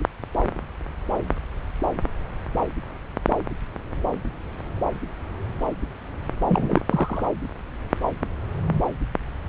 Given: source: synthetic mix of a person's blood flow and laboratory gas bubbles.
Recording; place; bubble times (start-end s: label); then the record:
Doppler ultrasound of blood flow; subclavian vein
6.48-6.81 s: bubbles
6.88-7.29 s: bubbles
From the record:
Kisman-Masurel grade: 212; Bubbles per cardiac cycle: several, 3 to 8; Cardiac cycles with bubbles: 1 to 10%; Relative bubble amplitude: moderate (0.250 to 0.450); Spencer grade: 1 (occasional bubble signal discernible with the cardiac motion signal, with majority of cardiac periods free of bubbles); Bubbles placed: anywhere in the cardiac cycle